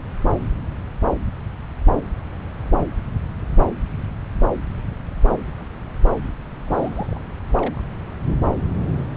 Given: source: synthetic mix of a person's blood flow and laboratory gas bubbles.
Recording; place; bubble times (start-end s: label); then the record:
Doppler ultrasound of blood flow; subclavian vein
6.67-7.18 s: bubbles
7.57-7.81 s: bubbles
From the record:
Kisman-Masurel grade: 211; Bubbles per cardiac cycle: several, 3 to 8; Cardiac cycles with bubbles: 1 to 10%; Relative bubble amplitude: barely perceptible (0.100 to 0.250); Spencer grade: 1 (occasional bubble signal discernible with the cardiac motion signal, with majority of cardiac periods free of bubbles); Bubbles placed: anywhere in the cardiac cycle